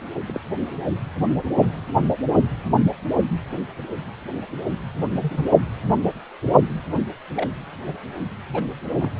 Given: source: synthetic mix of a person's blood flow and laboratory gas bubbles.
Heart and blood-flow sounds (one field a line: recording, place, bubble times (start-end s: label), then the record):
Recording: Doppler ultrasound of blood flow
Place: precordium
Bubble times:
0.27-0.40 s: bubbles
1.62-1.68 s: bubbles
5.21-5.44 s: bubbles
7.36-7.50 s: bubbles
7.86-7.93 s: bubbles
8.54-8.65 s: bubbles
9.00-9.12 s: bubbles
From the record:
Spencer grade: 2 (many but less than half of the cardiac periods contain bubble signals, singularly or in groups)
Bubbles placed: only in the low amplitude regions of the cardiac cycle